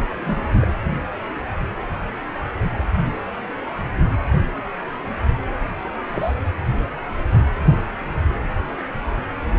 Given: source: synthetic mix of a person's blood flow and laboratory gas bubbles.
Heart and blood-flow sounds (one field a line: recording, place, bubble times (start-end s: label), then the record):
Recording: Doppler ultrasound of blood flow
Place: precordium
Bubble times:
0.16-0.66 s: bubbles
0.90-0.99 s: bubbles
6.05-6.34 s: bubbles
From the record:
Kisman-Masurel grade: 122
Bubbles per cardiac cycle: 1 to 2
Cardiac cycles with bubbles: 10 to 50%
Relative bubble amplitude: moderate (0.250 to 0.450)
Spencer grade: 2 (many but less than half of the cardiac periods contain bubble signals, singularly or in groups)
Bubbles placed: anywhere in the cardiac cycle